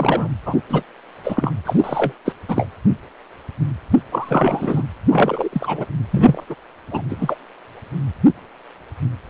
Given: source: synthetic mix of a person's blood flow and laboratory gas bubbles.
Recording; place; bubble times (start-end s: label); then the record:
Doppler ultrasound of blood flow; precordium
0.00-0.28 s: bubbles
0.46-0.61 s: bubbles
0.69-0.83 s: bubbles
1.23-1.54 s: bubbles
1.65-2.12 s: bubbles
2.25-2.33 s: bubbles
2.48-2.68 s: bubbles
4.11-4.83 s: bubbles
5.09-5.49 s: bubbles
5.52-5.86 s: bubbles
6.10-6.44 s: bubbles
6.49-6.55 s: bubbles
6.91-7.02 s: bubbles
7.09-7.36 s: bubbles
From the record:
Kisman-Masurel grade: 333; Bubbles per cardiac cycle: rolling drumbeat, 9 or more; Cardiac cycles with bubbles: 50 to 99%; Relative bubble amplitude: loud (0.450 to 0.775); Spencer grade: 3 (all of the cardiac periods contain showers or single bubble signals, but not dominating or overriding the cardiac motion signals); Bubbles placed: anywhere in the cardiac cycle